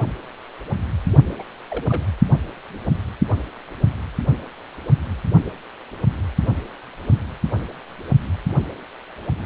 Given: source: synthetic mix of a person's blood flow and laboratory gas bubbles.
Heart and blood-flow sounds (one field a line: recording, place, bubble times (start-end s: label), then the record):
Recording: Doppler ultrasound of blood flow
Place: precordium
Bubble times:
1.39-1.44 s: bubbles
1.70-2.10 s: bubbles
From the record:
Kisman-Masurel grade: 111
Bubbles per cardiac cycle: 1 to 2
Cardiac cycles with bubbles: 1 to 10%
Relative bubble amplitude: barely perceptible (0.100 to 0.250)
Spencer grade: 1 (occasional bubble signal discernible with the cardiac motion signal, with majority of cardiac periods free of bubbles)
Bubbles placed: anywhere in the cardiac cycle